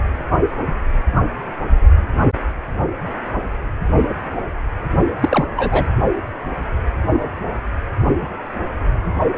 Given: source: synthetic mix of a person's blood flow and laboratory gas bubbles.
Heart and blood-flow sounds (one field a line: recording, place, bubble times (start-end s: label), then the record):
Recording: Doppler ultrasound of blood flow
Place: precordium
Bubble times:
5.20-5.46 s: bubbles
5.55-5.88 s: bubbles
From the record:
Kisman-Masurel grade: 212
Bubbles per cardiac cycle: several, 3 to 8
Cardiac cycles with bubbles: 1 to 10%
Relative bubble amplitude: moderate (0.250 to 0.450)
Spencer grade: 1 (occasional bubble signal discernible with the cardiac motion signal, with majority of cardiac periods free of bubbles)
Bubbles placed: anywhere in the cardiac cycle